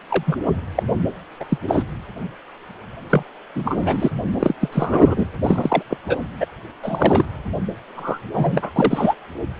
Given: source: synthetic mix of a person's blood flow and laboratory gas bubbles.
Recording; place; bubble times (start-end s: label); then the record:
Doppler ultrasound of blood flow; precordium
0.10-0.23 s: bubbles
0.26-0.37 s: bubbles
0.75-0.83 s: bubbles
1.40-1.46 s: bubbles
1.48-1.58 s: bubbles
1.68-1.83 s: bubbles
3.10-3.23 s: bubbles
3.55-4.10 s: bubbles
4.39-4.54 s: bubbles
4.61-4.69 s: bubbles
4.72-5.29 s: bubbles
5.45-5.83 s: bubbles
5.90-5.97 s: bubbles
6.07-6.17 s: bubbles
6.40-6.46 s: bubbles
6.82-7.25 s: bubbles
7.96-8.19 s: bubbles
8.34-8.71 s: bubbles
8.76-9.14 s: bubbles
From the record:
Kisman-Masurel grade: 232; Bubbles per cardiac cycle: several, 3 to 8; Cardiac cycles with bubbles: 50 to 99%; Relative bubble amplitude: moderate (0.250 to 0.450); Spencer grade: 3 (all of the cardiac periods contain showers or single bubble signals, but not dominating or overriding the cardiac motion signals); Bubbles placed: anywhere in the cardiac cycle